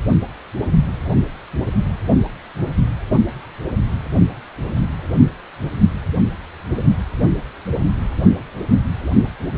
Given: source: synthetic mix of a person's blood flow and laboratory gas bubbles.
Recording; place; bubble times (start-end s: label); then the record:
Doppler ultrasound of blood flow; precordium
no bubbles
From the record:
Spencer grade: 0 (complete lack of bubble signals)